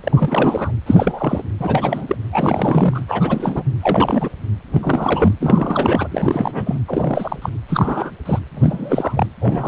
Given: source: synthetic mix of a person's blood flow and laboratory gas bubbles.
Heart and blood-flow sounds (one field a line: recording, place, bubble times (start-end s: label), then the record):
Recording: Doppler ultrasound of blood flow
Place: precordium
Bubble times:
0.04-0.72 s: bubbles
0.86-1.43 s: bubbles
1.59-2.16 s: bubbles
2.32-3.00 s: bubbles
3.07-3.63 s: bubbles
3.80-4.29 s: bubbles
4.73-5.33 s: bubbles
5.40-6.08 s: bubbles
6.11-6.79 s: bubbles
6.88-7.50 s: bubbles
7.68-8.11 s: bubbles
8.25-8.39 s: bubbles
8.54-9.27 s: bubbles
9.40-9.68 s: bubbles
From the record:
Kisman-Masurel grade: 343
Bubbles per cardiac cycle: rolling drumbeat, 9 or more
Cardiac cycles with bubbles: 100%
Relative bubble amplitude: loud (0.450 to 0.775)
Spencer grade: 3 (all of the cardiac periods contain showers or single bubble signals, but not dominating or overriding the cardiac motion signals)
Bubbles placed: anywhere in the cardiac cycle